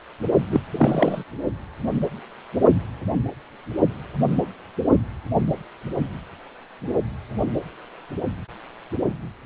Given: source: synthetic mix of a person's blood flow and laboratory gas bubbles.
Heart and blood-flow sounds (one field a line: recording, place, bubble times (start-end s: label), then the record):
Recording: Doppler ultrasound of blood flow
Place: precordium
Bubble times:
0.51-0.60 s: bubbles
0.72-1.23 s: bubbles
From the record:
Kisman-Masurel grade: 212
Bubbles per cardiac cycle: several, 3 to 8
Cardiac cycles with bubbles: 1 to 10%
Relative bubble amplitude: moderate (0.250 to 0.450)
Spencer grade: 1 (occasional bubble signal discernible with the cardiac motion signal, with majority of cardiac periods free of bubbles)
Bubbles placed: only in the low amplitude regions of the cardiac cycle